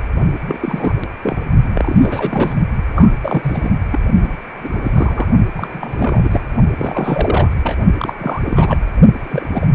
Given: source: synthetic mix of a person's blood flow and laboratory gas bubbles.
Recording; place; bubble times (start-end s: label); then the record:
Doppler ultrasound of blood flow; precordium
0.47-1.05 s: bubbles
1.22-1.47 s: bubbles
1.74-2.53 s: bubbles
2.96-3.12 s: bubbles
3.21-3.70 s: bubbles
3.91-3.99 s: bubbles
4.24-4.33 s: bubbles
4.53-5.27 s: bubbles
5.56-6.40 s: bubbles
6.77-7.49 s: bubbles
7.63-7.78 s: bubbles
7.98-8.15 s: bubbles
8.19-8.84 s: bubbles
9.23-9.67 s: bubbles
From the record:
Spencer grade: 3 (all of the cardiac periods contain showers or single bubble signals, but not dominating or overriding the cardiac motion signals); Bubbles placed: only in the low amplitude regions of the cardiac cycle